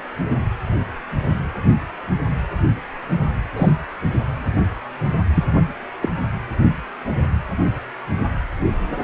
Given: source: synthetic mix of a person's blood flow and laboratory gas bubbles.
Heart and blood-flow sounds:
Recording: Doppler ultrasound of blood flow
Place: precordium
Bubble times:
2.24-2.37 s: bubbles
3.56-3.69 s: bubbles
5.34-5.44 s: bubbles
6.01-6.09 s: bubbles
From the record:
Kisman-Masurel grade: 123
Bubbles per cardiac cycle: 1 to 2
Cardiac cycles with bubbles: 10 to 50%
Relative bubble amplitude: loud (0.450 to 0.775)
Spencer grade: 2 (many but less than half of the cardiac periods contain bubble signals, singularly or in groups)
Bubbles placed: anywhere in the cardiac cycle

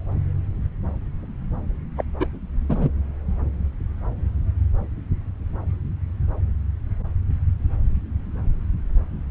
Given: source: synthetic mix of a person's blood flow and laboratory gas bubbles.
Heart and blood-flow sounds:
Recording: Doppler ultrasound of blood flow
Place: subclavian vein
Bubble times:
1.97-2.04 s: bubbles
2.20-2.27 s: bubbles
2.69-2.89 s: bubbles
From the record:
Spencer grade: 2 (many but less than half of the cardiac periods contain bubble signals, singularly or in groups)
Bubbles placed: anywhere in the cardiac cycle

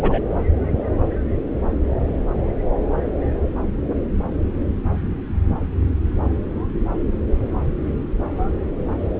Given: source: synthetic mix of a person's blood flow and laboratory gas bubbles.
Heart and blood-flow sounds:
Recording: Doppler ultrasound of blood flow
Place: subclavian vein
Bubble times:
0.02-0.19 s: bubbles
From the record:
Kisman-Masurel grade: 213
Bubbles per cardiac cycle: several, 3 to 8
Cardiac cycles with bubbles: 1 to 10%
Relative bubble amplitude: loud (0.450 to 0.775)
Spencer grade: 1 (occasional bubble signal discernible with the cardiac motion signal, with majority of cardiac periods free of bubbles)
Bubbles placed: anywhere in the cardiac cycle

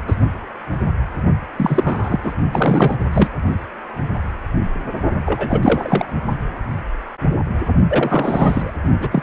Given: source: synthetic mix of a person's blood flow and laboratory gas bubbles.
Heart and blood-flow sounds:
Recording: Doppler ultrasound of blood flow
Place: precordium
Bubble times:
0.08-0.15 s: bubbles
1.57-2.19 s: bubbles
2.22-2.32 s: bubbles
2.52-2.96 s: bubbles
3.12-3.29 s: bubbles
5.25-6.06 s: bubbles
7.88-8.72 s: bubbles
9.00-9.09 s: bubbles
9.12-9.22 s: bubbles
From the record:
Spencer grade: 3 (all of the cardiac periods contain showers or single bubble signals, but not dominating or overriding the cardiac motion signals)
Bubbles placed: only in the low amplitude regions of the cardiac cycle

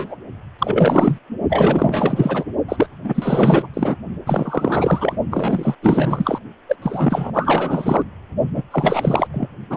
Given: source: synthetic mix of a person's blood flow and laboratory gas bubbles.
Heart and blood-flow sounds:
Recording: Doppler ultrasound of blood flow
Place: precordium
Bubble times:
0.00-0.16 s: bubbles
0.59-1.19 s: bubbles
1.49-2.44 s: bubbles
2.68-2.89 s: bubbles
3.03-3.67 s: bubbles
3.73-3.96 s: bubbles
4.27-5.17 s: bubbles
5.31-5.75 s: bubbles
5.82-6.40 s: bubbles
6.69-6.76 s: bubbles
6.82-7.31 s: bubbles
7.33-8.02 s: bubbles
8.54-8.64 s: bubbles
8.71-9.28 s: bubbles
9.33-9.49 s: bubbles
9.70-9.77 s: bubbles
From the record:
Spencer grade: 4 (maximum detectable bubble signal sounding continuously throughout systole and diastole of every cardiac period, and overriding the amplitude of the normal cardiac signals)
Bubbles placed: only in the low amplitude regions of the cardiac cycle

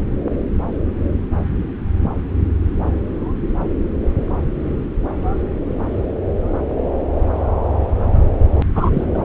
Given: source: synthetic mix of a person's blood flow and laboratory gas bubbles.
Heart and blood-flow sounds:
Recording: Doppler ultrasound of blood flow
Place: subclavian vein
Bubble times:
8.75-8.91 s: bubbles
8.93-9.06 s: bubbles
9.14-9.22 s: bubbles
From the record:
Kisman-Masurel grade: 222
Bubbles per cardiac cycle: several, 3 to 8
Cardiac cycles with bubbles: 10 to 50%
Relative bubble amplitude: moderate (0.250 to 0.450)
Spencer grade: 2 (many but less than half of the cardiac periods contain bubble signals, singularly or in groups)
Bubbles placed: anywhere in the cardiac cycle

